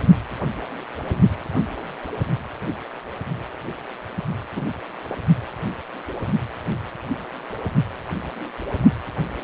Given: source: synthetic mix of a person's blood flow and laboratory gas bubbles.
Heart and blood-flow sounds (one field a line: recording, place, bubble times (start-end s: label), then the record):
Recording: Doppler ultrasound of blood flow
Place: precordium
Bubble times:
4.53-4.68 s: bubbles
5.03-5.17 s: bubbles
From the record:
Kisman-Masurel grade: 112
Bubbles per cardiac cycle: 1 to 2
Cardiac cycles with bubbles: 1 to 10%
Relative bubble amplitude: moderate (0.250 to 0.450)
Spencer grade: 1 (occasional bubble signal discernible with the cardiac motion signal, with majority of cardiac periods free of bubbles)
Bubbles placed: only in the low amplitude regions of the cardiac cycle